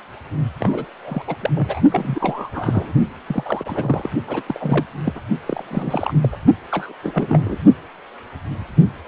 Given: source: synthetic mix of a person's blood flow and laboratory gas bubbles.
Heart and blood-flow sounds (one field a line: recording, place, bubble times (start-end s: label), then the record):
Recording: Doppler ultrasound of blood flow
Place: precordium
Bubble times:
0.60-0.86 s: bubbles
1.04-1.22 s: bubbles
1.27-1.35 s: bubbles
1.41-1.50 s: bubbles
1.54-1.81 s: bubbles
1.91-2.93 s: bubbles
3.26-4.09 s: bubbles
4.27-4.42 s: bubbles
4.47-4.85 s: bubbles
5.04-5.21 s: bubbles
5.47-6.14 s: bubbles
6.22-6.29 s: bubbles
6.31-6.37 s: bubbles
6.71-6.92 s: bubbles
7.03-7.58 s: bubbles
From the record:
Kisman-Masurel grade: 332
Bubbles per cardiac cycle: rolling drumbeat, 9 or more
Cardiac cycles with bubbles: 50 to 99%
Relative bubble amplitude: moderate (0.250 to 0.450)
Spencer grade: 3 (all of the cardiac periods contain showers or single bubble signals, but not dominating or overriding the cardiac motion signals)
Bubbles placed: only in the low amplitude regions of the cardiac cycle